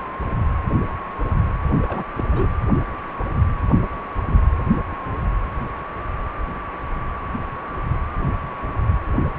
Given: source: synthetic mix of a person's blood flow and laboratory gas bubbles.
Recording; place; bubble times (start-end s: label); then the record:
Doppler ultrasound of blood flow; precordium
1.82-2.06 s: bubbles
2.18-2.23 s: bubbles
2.26-2.48 s: bubbles
From the record:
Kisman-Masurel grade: 211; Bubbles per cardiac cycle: several, 3 to 8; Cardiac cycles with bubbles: 1 to 10%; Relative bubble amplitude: barely perceptible (0.100 to 0.250); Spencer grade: 1 (occasional bubble signal discernible with the cardiac motion signal, with majority of cardiac periods free of bubbles); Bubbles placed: anywhere in the cardiac cycle